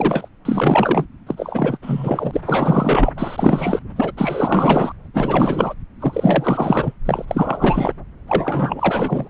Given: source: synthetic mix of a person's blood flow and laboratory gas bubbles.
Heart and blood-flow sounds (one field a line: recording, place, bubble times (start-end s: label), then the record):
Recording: Doppler ultrasound of blood flow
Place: subclavian vein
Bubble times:
0.00-0.29 s: bubbles
0.45-1.06 s: bubbles
1.26-1.77 s: bubbles
1.81-2.41 s: bubbles
2.45-3.81 s: bubbles
3.96-4.13 s: bubbles
4.17-4.92 s: bubbles
5.13-5.74 s: bubbles
6.00-6.94 s: bubbles
7.05-7.25 s: bubbles
7.28-7.94 s: bubbles
8.27-9.29 s: bubbles
From the record:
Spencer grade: 4 (maximum detectable bubble signal sounding continuously throughout systole and diastole of every cardiac period, and overriding the amplitude of the normal cardiac signals)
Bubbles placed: anywhere in the cardiac cycle